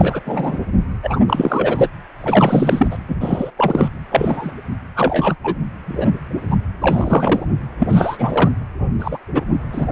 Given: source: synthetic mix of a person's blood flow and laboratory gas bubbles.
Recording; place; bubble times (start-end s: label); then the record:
Doppler ultrasound of blood flow; precordium
0.00-0.20 s: bubbles
0.25-0.57 s: bubbles
1.02-1.24 s: bubbles
1.27-1.89 s: bubbles
2.18-2.88 s: bubbles
2.91-2.98 s: bubbles
3.08-3.16 s: bubbles
3.21-3.51 s: bubbles
3.57-3.90 s: bubbles
4.11-4.52 s: bubbles
4.96-5.36 s: bubbles
5.43-5.54 s: bubbles
5.86-6.12 s: bubbles
6.50-6.57 s: bubbles
6.81-7.46 s: bubbles
7.79-8.51 s: bubbles
8.99-9.19 s: bubbles
9.34-9.43 s: bubbles
9.72-9.85 s: bubbles
From the record:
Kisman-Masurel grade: 243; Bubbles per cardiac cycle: several, 3 to 8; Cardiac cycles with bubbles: 100%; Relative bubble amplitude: loud (0.450 to 0.775); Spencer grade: 3 (all of the cardiac periods contain showers or single bubble signals, but not dominating or overriding the cardiac motion signals); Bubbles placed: anywhere in the cardiac cycle